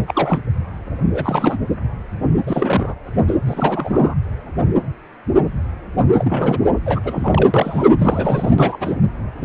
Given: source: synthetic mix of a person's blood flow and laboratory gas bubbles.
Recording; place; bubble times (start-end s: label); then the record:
Doppler ultrasound of blood flow; precordium
0.00-0.03 s: bubbles
0.07-0.40 s: bubbles
1.14-1.57 s: bubbles
2.46-2.94 s: bubbles
3.27-3.34 s: bubbles
3.46-4.16 s: bubbles
6.19-6.58 s: bubbles
6.86-7.52 s: bubbles
7.54-7.87 s: bubbles
7.99-8.51 s: bubbles
8.58-8.78 s: bubbles
8.80-8.96 s: bubbles
9.41-9.45 s: bubbles
From the record:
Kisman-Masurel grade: 332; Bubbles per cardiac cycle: rolling drumbeat, 9 or more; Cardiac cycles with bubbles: 50 to 99%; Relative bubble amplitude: moderate (0.250 to 0.450); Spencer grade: 3 (all of the cardiac periods contain showers or single bubble signals, but not dominating or overriding the cardiac motion signals); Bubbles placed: anywhere in the cardiac cycle